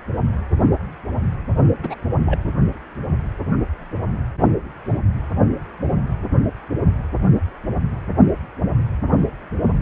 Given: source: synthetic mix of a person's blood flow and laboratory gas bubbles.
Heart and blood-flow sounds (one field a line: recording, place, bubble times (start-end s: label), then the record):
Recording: Doppler ultrasound of blood flow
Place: precordium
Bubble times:
1.83-1.96 s: bubbles
2.25-2.38 s: bubbles
From the record:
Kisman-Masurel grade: 112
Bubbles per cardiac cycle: 1 to 2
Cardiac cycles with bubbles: 1 to 10%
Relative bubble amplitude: moderate (0.250 to 0.450)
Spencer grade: 1 (occasional bubble signal discernible with the cardiac motion signal, with majority of cardiac periods free of bubbles)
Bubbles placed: anywhere in the cardiac cycle